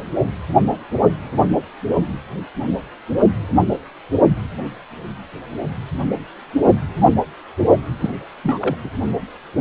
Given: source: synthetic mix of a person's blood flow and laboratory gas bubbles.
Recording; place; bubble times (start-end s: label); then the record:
Doppler ultrasound of blood flow; precordium
7.99-8.10 s: bubbles
8.43-8.59 s: bubbles
8.62-8.76 s: bubbles
8.84-8.89 s: bubbles
From the record:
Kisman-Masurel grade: 212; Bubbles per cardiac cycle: several, 3 to 8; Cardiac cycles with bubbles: 1 to 10%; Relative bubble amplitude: moderate (0.250 to 0.450); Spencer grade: 1 (occasional bubble signal discernible with the cardiac motion signal, with majority of cardiac periods free of bubbles); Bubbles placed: only in the low amplitude regions of the cardiac cycle